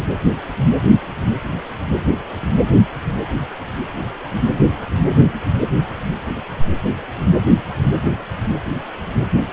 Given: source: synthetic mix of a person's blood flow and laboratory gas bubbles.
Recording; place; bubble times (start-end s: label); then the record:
Doppler ultrasound of blood flow; precordium
0.00-0.04 s: bubbles
From the record:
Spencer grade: 1 (occasional bubble signal discernible with the cardiac motion signal, with majority of cardiac periods free of bubbles); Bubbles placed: anywhere in the cardiac cycle